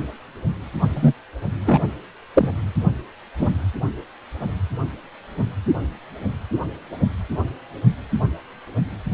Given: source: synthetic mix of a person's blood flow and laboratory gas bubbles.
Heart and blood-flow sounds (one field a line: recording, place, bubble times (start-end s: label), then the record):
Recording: Doppler ultrasound of blood flow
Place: precordium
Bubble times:
0.95-1.13 s: bubbles
1.65-1.80 s: bubbles
2.34-2.50 s: bubbles
3.38-3.48 s: bubbles
From the record:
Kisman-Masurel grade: 123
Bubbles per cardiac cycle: 1 to 2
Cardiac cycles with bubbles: 10 to 50%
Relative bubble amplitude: loud (0.450 to 0.775)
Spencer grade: 2 (many but less than half of the cardiac periods contain bubble signals, singularly or in groups)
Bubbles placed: only in the low amplitude regions of the cardiac cycle